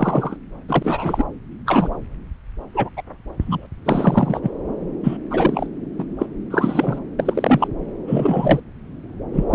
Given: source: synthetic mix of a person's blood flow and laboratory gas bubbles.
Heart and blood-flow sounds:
Doppler ultrasound of blood flow; subclavian vein
0.00-0.36 s: bubbles
0.68-1.24 s: bubbles
1.66-1.90 s: bubbles
2.74-2.90 s: bubbles
2.96-3.02 s: bubbles
3.40-3.67 s: bubbles
3.84-4.39 s: bubbles
4.43-4.51 s: bubbles
5.03-5.17 s: bubbles
5.30-5.67 s: bubbles
5.98-6.04 s: bubbles
6.18-6.26 s: bubbles
6.50-6.99 s: bubbles
7.19-7.68 s: bubbles
8.07-8.60 s: bubbles
9.32-9.45 s: bubbles
9.50-9.55 s: bubbles
From the record:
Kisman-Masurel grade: 243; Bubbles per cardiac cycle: several, 3 to 8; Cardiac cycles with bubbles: 100%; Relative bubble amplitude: loud (0.450 to 0.775); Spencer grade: 3 (all of the cardiac periods contain showers or single bubble signals, but not dominating or overriding the cardiac motion signals); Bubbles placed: anywhere in the cardiac cycle

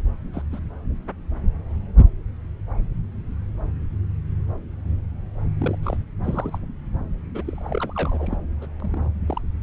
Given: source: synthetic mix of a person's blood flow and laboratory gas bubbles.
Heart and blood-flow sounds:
Doppler ultrasound of blood flow; subclavian vein
0.33-0.42 s: bubbles
0.52-0.60 s: bubbles
5.58-5.76 s: bubbles
5.83-5.97 s: bubbles
6.24-6.58 s: bubbles
7.34-8.36 s: bubbles
8.61-8.66 s: bubbles
8.80-9.11 s: bubbles
9.26-9.40 s: bubbles
From the record:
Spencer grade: 2 (many but less than half of the cardiac periods contain bubble signals, singularly or in groups); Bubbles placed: anywhere in the cardiac cycle

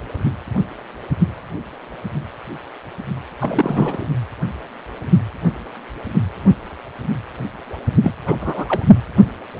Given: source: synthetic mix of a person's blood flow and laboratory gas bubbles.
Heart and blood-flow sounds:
Doppler ultrasound of blood flow; precordium
3.40-4.06 s: bubbles
8.02-8.12 s: bubbles
8.26-8.65 s: bubbles
8.68-8.85 s: bubbles
From the record:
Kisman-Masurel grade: 222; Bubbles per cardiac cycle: several, 3 to 8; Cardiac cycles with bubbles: 10 to 50%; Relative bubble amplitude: moderate (0.250 to 0.450); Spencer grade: 2 (many but less than half of the cardiac periods contain bubble signals, singularly or in groups); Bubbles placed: only in the low amplitude regions of the cardiac cycle

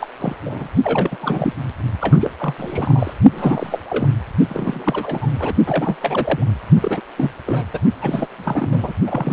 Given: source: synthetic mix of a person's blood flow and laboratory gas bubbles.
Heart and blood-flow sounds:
Doppler ultrasound of blood flow; precordium
0.00-0.08 s: bubbles
0.19-0.35 s: bubbles
0.44-0.68 s: bubbles
0.83-1.17 s: bubbles
1.20-1.54 s: bubbles
2.00-2.17 s: bubbles
2.20-2.30 s: bubbles
2.40-2.54 s: bubbles
2.58-3.14 s: bubbles
3.32-3.78 s: bubbles
3.90-4.08 s: bubbles
4.49-5.36 s: bubbles
5.39-5.53 s: bubbles
5.66-5.96 s: bubbles
6.01-6.48 s: bubbles
6.82-7.01 s: bubbles
7.17-7.31 s: bubbles
7.46-7.63 s: bubbles
7.73-7.80 s: bubbles
8.02-8.28 s: bubbles
8.30-8.93 s: bubbles
9.06-9.33 s: bubbles
From the record:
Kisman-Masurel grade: 342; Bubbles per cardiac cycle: rolling drumbeat, 9 or more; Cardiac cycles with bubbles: 100%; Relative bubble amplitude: moderate (0.250 to 0.450); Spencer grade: 3 (all of the cardiac periods contain showers or single bubble signals, but not dominating or overriding the cardiac motion signals); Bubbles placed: only in the low amplitude regions of the cardiac cycle

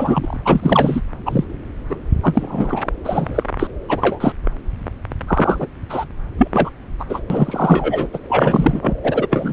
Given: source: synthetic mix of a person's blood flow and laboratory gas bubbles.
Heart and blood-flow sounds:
Doppler ultrasound of blood flow; subclavian vein
0.00-0.37 s: bubbles
0.45-1.01 s: bubbles
1.25-1.45 s: bubbles
1.89-1.95 s: bubbles
2.23-2.86 s: bubbles
3.04-3.43 s: bubbles
3.59-3.67 s: bubbles
3.88-4.33 s: bubbles
5.27-5.67 s: bubbles
5.89-6.04 s: bubbles
6.38-6.48 s: bubbles
6.53-6.70 s: bubbles
6.99-7.05 s: bubbles
7.09-7.20 s: bubbles
7.30-8.07 s: bubbles
8.13-8.18 s: bubbles
8.29-8.97 s: bubbles
9.04-9.27 s: bubbles
9.30-9.53 s: bubbles
From the record:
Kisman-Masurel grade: 243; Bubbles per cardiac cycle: several, 3 to 8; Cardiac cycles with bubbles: 100%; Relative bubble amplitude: loud (0.450 to 0.775); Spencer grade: 3 (all of the cardiac periods contain showers or single bubble signals, but not dominating or overriding the cardiac motion signals); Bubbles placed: anywhere in the cardiac cycle

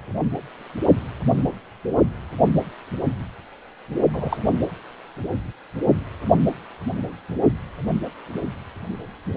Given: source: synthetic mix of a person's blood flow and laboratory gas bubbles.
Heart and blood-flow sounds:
Doppler ultrasound of blood flow; precordium
4.13-4.37 s: bubbles
From the record:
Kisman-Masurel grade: 113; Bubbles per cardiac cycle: 1 to 2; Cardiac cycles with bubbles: 1 to 10%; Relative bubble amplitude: loud (0.450 to 0.775); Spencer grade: 1 (occasional bubble signal discernible with the cardiac motion signal, with majority of cardiac periods free of bubbles); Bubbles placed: anywhere in the cardiac cycle

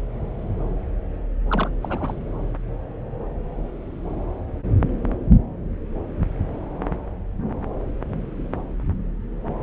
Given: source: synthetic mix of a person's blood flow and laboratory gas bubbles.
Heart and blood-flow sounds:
Doppler ultrasound of blood flow; subclavian vein
1.51-1.70 s: bubbles
1.83-2.13 s: bubbles
From the record:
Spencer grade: 1 (occasional bubble signal discernible with the cardiac motion signal, with majority of cardiac periods free of bubbles); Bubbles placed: anywhere in the cardiac cycle

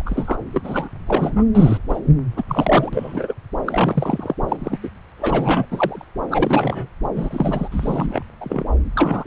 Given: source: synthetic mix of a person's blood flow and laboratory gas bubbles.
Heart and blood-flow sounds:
Doppler ultrasound of blood flow; subclavian vein
0.00-0.02 s: bubbles
0.05-0.37 s: bubbles
0.53-0.89 s: bubbles
1.06-1.44 s: bubbles
1.54-1.78 s: bubbles
1.89-1.99 s: bubbles
2.36-2.42 s: bubbles
2.48-2.90 s: bubbles
2.93-3.34 s: bubbles
3.66-4.34 s: bubbles
4.48-4.56 s: bubbles
4.59-4.77 s: bubbles
4.83-4.89 s: bubbles
5.17-5.66 s: bubbles
5.71-6.05 s: bubbles
6.30-6.88 s: bubbles
7.16-7.68 s: bubbles
7.71-8.23 s: bubbles
8.41-8.64 s: bubbles
8.96-9.24 s: bubbles
From the record:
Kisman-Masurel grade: 242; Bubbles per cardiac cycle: several, 3 to 8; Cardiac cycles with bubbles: 100%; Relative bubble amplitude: moderate (0.250 to 0.450); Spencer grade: 3 (all of the cardiac periods contain showers or single bubble signals, but not dominating or overriding the cardiac motion signals); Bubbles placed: anywhere in the cardiac cycle

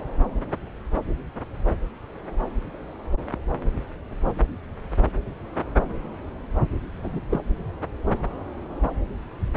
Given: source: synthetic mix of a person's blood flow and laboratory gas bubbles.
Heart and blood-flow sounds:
Doppler ultrasound of blood flow; subclavian vein
7.03-7.20 s: bubbles
7.30-7.41 s: bubbles
From the record:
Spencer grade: 1 (occasional bubble signal discernible with the cardiac motion signal, with majority of cardiac periods free of bubbles); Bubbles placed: anywhere in the cardiac cycle

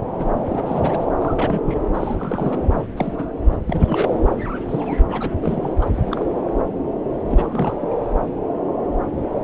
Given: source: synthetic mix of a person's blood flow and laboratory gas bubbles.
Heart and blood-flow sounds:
Doppler ultrasound of blood flow; subclavian vein
0.14-0.26 s: bubbles
0.44-1.08 s: bubbles
1.19-1.87 s: bubbles
1.94-2.62 s: bubbles
2.73-2.86 s: bubbles
2.96-3.32 s: bubbles
3.51-3.57 s: bubbles
3.65-4.16 s: bubbles
4.68-4.97 s: bubbles
5.08-5.36 s: bubbles
5.42-5.75 s: bubbles
5.82-5.85 s: bubbles
5.94-6.25 s: bubbles
7.29-7.77 s: bubbles
7.80-7.88 s: bubbles
From the record:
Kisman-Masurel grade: 332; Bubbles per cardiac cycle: rolling drumbeat, 9 or more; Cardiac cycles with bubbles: 50 to 99%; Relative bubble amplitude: moderate (0.250 to 0.450); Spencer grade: 3 (all of the cardiac periods contain showers or single bubble signals, but not dominating or overriding the cardiac motion signals); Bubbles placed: anywhere in the cardiac cycle

